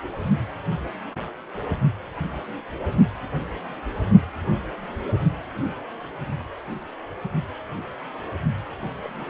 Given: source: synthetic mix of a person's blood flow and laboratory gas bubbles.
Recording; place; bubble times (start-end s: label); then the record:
Doppler ultrasound of blood flow; precordium
9.00-9.10 s: bubbles
9.18-9.30 s: bubbles
From the record:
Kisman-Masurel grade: 111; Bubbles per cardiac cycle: 1 to 2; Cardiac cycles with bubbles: 1 to 10%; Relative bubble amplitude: barely perceptible (0.100 to 0.250); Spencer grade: 1 (occasional bubble signal discernible with the cardiac motion signal, with majority of cardiac periods free of bubbles); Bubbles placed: only in the low amplitude regions of the cardiac cycle